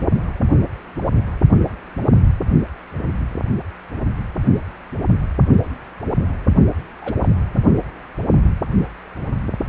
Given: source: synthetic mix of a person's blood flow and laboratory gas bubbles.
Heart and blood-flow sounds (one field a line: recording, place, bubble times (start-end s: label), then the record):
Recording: Doppler ultrasound of blood flow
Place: precordium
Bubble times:
7.01-7.15 s: bubbles
7.21-7.29 s: bubbles
From the record:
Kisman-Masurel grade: 211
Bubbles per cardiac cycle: several, 3 to 8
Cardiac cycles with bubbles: 1 to 10%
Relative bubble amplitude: barely perceptible (0.100 to 0.250)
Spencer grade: 1 (occasional bubble signal discernible with the cardiac motion signal, with majority of cardiac periods free of bubbles)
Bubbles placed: only in the low amplitude regions of the cardiac cycle